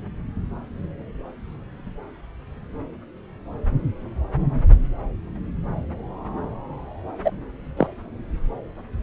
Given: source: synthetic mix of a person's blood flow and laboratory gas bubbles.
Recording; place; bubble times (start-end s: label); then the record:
Doppler ultrasound of blood flow; subclavian vein
7.25-7.32 s: bubbles
7.77-7.88 s: bubbles
From the record:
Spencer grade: 1 (occasional bubble signal discernible with the cardiac motion signal, with majority of cardiac periods free of bubbles); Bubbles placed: anywhere in the cardiac cycle